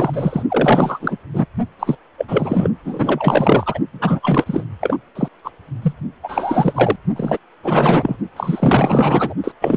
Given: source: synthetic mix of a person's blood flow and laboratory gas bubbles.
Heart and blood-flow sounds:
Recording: Doppler ultrasound of blood flow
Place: precordium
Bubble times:
0.00-0.43 s: bubbles
0.49-1.18 s: bubbles
1.32-1.46 s: bubbles
1.79-1.98 s: bubbles
2.18-2.25 s: bubbles
2.28-2.69 s: bubbles
2.84-3.79 s: bubbles
3.93-4.65 s: bubbles
4.81-4.97 s: bubbles
5.15-5.28 s: bubbles
5.44-5.51 s: bubbles
5.82-5.93 s: bubbles
6.23-6.96 s: bubbles
7.16-7.38 s: bubbles
7.64-8.16 s: bubbles
8.36-9.34 s: bubbles
9.44-9.52 s: bubbles
9.61-9.77 s: bubbles
From the record:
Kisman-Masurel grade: 444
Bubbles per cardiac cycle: continuous sound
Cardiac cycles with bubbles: 100%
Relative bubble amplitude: maximal (0.775 to 0.999)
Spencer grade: 4 (maximum detectable bubble signal sounding continuously throughout systole and diastole of every cardiac period, and overriding the amplitude of the normal cardiac signals)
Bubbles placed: only in the low amplitude regions of the cardiac cycle

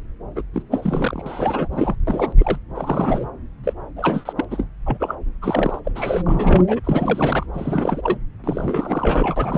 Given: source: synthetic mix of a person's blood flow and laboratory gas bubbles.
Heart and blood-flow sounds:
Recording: Doppler ultrasound of blood flow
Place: subclavian vein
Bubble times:
0.35-0.43 s: bubbles
0.53-0.62 s: bubbles
0.71-1.68 s: bubbles
1.71-1.96 s: bubbles
2.07-2.33 s: bubbles
2.38-2.58 s: bubbles
2.75-3.30 s: bubbles
3.64-3.73 s: bubbles
3.96-4.33 s: bubbles
4.36-4.45 s: bubbles
4.50-4.67 s: bubbles
4.86-4.97 s: bubbles
5.00-5.15 s: bubbles
5.42-5.79 s: bubbles
5.84-5.92 s: bubbles
5.95-6.22 s: bubbles
6.26-6.65 s: bubbles
6.67-6.80 s: bubbles
6.84-7.46 s: bubbles
7.53-8.18 s: bubbles
8.43-9.58 s: bubbles
From the record:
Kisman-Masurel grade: 342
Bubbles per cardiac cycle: rolling drumbeat, 9 or more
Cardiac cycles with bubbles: 100%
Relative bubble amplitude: moderate (0.250 to 0.450)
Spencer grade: 3 (all of the cardiac periods contain showers or single bubble signals, but not dominating or overriding the cardiac motion signals)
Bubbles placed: anywhere in the cardiac cycle

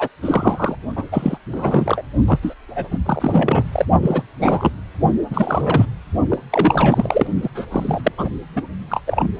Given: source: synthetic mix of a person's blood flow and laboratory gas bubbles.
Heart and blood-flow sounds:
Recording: Doppler ultrasound of blood flow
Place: precordium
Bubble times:
0.00-0.08 s: bubbles
0.22-0.75 s: bubbles
0.96-1.04 s: bubbles
1.11-1.38 s: bubbles
1.52-2.02 s: bubbles
2.26-2.39 s: bubbles
2.42-2.54 s: bubbles
2.68-2.88 s: bubbles
2.91-2.99 s: bubbles
3.05-3.65 s: bubbles
3.72-3.85 s: bubbles
4.02-4.23 s: bubbles
4.40-4.71 s: bubbles
5.30-5.86 s: bubbles
6.29-6.38 s: bubbles
6.50-7.27 s: bubbles
7.42-7.50 s: bubbles
7.55-7.67 s: bubbles
7.71-8.01 s: bubbles
8.04-8.12 s: bubbles
8.17-8.30 s: bubbles
8.55-8.62 s: bubbles
8.89-9.00 s: bubbles
9.06-9.30 s: bubbles
From the record:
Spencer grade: 3 (all of the cardiac periods contain showers or single bubble signals, but not dominating or overriding the cardiac motion signals)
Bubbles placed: only in the low amplitude regions of the cardiac cycle

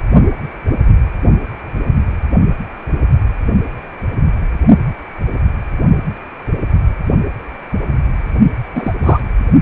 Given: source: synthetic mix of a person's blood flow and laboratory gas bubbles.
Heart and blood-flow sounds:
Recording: Doppler ultrasound of blood flow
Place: precordium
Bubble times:
8.74-8.94 s: bubbles
9.03-9.20 s: bubbles
From the record:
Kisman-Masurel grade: 212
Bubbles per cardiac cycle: several, 3 to 8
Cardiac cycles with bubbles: 1 to 10%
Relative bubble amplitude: moderate (0.250 to 0.450)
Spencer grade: 1 (occasional bubble signal discernible with the cardiac motion signal, with majority of cardiac periods free of bubbles)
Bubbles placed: only in the low amplitude regions of the cardiac cycle

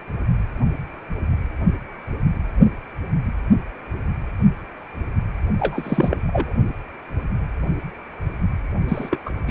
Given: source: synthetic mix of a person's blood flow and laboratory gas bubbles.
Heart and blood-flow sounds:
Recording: Doppler ultrasound of blood flow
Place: precordium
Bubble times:
5.59-6.15 s: bubbles
6.27-6.54 s: bubbles
8.88-9.18 s: bubbles
9.25-9.33 s: bubbles
9.47-9.51 s: bubbles
From the record:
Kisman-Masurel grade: 222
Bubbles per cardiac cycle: several, 3 to 8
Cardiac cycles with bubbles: 10 to 50%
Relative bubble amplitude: moderate (0.250 to 0.450)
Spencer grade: 2 (many but less than half of the cardiac periods contain bubble signals, singularly or in groups)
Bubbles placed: only in the low amplitude regions of the cardiac cycle

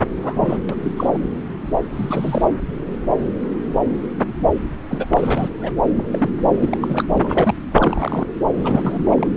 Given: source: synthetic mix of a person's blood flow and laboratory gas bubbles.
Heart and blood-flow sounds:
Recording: Doppler ultrasound of blood flow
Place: subclavian vein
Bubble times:
0.12-0.60 s: bubbles
0.69-0.75 s: bubbles
0.82-0.91 s: bubbles
0.96-1.18 s: bubbles
1.93-2.46 s: bubbles
4.89-5.06 s: bubbles
5.10-5.49 s: bubbles
5.59-5.71 s: bubbles
5.99-6.04 s: bubbles
6.12-6.30 s: bubbles
6.48-7.04 s: bubbles
7.14-7.54 s: bubbles
7.75-8.27 s: bubbles
8.56-9.28 s: bubbles
From the record:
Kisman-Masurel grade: 232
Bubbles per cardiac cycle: several, 3 to 8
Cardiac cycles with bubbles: 50 to 99%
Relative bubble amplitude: moderate (0.250 to 0.450)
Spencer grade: 3 (all of the cardiac periods contain showers or single bubble signals, but not dominating or overriding the cardiac motion signals)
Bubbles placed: anywhere in the cardiac cycle

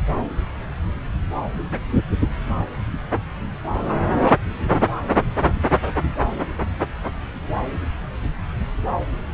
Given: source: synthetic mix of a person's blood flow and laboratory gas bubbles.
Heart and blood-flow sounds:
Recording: Doppler ultrasound of blood flow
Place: subclavian vein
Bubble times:
no bubbles
From the record:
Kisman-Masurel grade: 000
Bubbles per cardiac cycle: 0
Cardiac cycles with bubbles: 0%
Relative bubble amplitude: no bubbles discernible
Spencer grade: 0 (complete lack of bubble signals)

